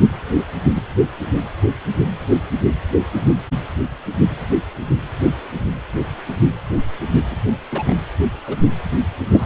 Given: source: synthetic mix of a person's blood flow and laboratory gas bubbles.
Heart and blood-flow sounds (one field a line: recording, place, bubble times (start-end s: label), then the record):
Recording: Doppler ultrasound of blood flow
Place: precordium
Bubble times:
0.73-0.82 s: bubbles
7.30-7.37 s: bubbles
7.71-7.95 s: bubbles
8.47-8.57 s: bubbles
9.30-9.45 s: bubbles
From the record:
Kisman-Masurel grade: 121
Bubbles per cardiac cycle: 1 to 2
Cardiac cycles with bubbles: 10 to 50%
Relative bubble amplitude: barely perceptible (0.100 to 0.250)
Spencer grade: 2 (many but less than half of the cardiac periods contain bubble signals, singularly or in groups)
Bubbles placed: anywhere in the cardiac cycle